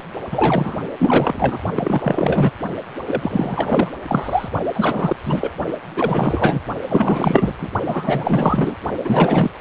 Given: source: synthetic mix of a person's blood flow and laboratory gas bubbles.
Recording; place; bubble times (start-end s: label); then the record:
Doppler ultrasound of blood flow; precordium
0.00-0.02 s: bubbles
0.31-0.79 s: bubbles
0.98-1.58 s: bubbles
1.74-2.52 s: bubbles
3.05-3.91 s: bubbles
4.08-4.49 s: bubbles
4.75-5.16 s: bubbles
5.24-5.53 s: bubbles
5.96-6.62 s: bubbles
6.89-7.54 s: bubbles
7.59-7.69 s: bubbles
7.86-8.76 s: bubbles
9.04-9.51 s: bubbles
9.58-9.61 s: bubbles
From the record:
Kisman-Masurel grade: 444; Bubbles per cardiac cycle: continuous sound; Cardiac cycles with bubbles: 100%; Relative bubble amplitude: maximal (0.775 to 0.999); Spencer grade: 4 (maximum detectable bubble signal sounding continuously throughout systole and diastole of every cardiac period, and overriding the amplitude of the normal cardiac signals); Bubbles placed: only in the low amplitude regions of the cardiac cycle